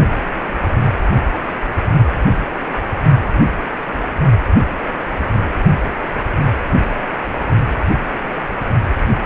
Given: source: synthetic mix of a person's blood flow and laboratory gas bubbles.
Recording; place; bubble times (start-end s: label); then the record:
Doppler ultrasound of blood flow; precordium
no bubbles
From the record:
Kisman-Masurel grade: 000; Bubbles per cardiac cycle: 0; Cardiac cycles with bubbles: 0%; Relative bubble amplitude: no bubbles discernible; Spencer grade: 0 (complete lack of bubble signals)